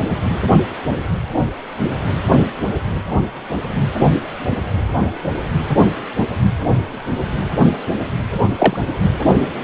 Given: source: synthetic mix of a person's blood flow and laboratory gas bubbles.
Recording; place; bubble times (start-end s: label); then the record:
Doppler ultrasound of blood flow; precordium
8.58-8.77 s: bubbles
From the record:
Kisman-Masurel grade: 113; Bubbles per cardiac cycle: 1 to 2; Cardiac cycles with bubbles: 1 to 10%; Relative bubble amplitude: loud (0.450 to 0.775); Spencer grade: 1 (occasional bubble signal discernible with the cardiac motion signal, with majority of cardiac periods free of bubbles); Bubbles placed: anywhere in the cardiac cycle